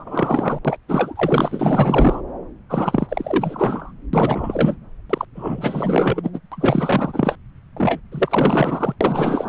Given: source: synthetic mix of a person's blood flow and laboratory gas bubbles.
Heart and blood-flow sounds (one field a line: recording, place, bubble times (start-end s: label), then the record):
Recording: Doppler ultrasound of blood flow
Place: subclavian vein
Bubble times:
0.00-0.59 s: bubbles
0.65-0.77 s: bubbles
0.88-2.21 s: bubbles
2.69-3.92 s: bubbles
4.13-4.76 s: bubbles
5.09-5.25 s: bubbles
5.35-6.30 s: bubbles
6.33-6.39 s: bubbles
6.51-7.35 s: bubbles
7.76-8.00 s: bubbles
8.12-8.95 s: bubbles
9.01-9.49 s: bubbles
From the record:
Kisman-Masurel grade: 444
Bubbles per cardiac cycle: continuous sound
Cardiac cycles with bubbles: 100%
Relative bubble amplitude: maximal (0.775 to 0.999)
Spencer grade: 4 (maximum detectable bubble signal sounding continuously throughout systole and diastole of every cardiac period, and overriding the amplitude of the normal cardiac signals)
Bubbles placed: anywhere in the cardiac cycle